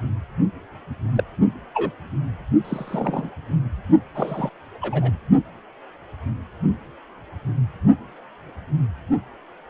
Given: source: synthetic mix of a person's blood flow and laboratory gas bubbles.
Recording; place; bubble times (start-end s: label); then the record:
Doppler ultrasound of blood flow; precordium
1.15-1.23 s: bubbles
1.74-1.91 s: bubbles
2.64-3.29 s: bubbles
4.14-4.50 s: bubbles
4.81-5.11 s: bubbles
From the record:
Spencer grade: 2 (many but less than half of the cardiac periods contain bubble signals, singularly or in groups); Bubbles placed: only in the low amplitude regions of the cardiac cycle